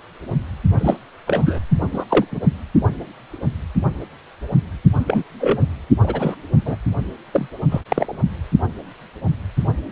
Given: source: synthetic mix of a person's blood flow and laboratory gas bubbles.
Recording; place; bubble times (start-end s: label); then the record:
Doppler ultrasound of blood flow; precordium
0.78-0.98 s: bubbles
1.27-1.59 s: bubbles
1.92-2.05 s: bubbles
2.09-2.25 s: bubbles
2.32-2.40 s: bubbles
5.07-5.24 s: bubbles
5.38-5.66 s: bubbles
6.03-6.35 s: bubbles
6.66-6.75 s: bubbles
7.33-7.48 s: bubbles
7.71-7.81 s: bubbles
7.88-8.20 s: bubbles
From the record:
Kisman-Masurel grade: 222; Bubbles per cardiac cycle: several, 3 to 8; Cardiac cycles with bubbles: 10 to 50%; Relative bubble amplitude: moderate (0.250 to 0.450); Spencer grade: 2 (many but less than half of the cardiac periods contain bubble signals, singularly or in groups); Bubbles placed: only in the low amplitude regions of the cardiac cycle